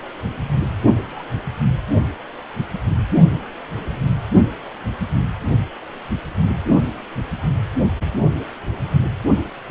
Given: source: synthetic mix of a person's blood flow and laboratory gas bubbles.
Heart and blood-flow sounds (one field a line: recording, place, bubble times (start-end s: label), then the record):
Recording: Doppler ultrasound of blood flow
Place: precordium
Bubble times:
1.01-1.23 s: bubbles
From the record:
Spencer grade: 1 (occasional bubble signal discernible with the cardiac motion signal, with majority of cardiac periods free of bubbles)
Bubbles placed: only in the low amplitude regions of the cardiac cycle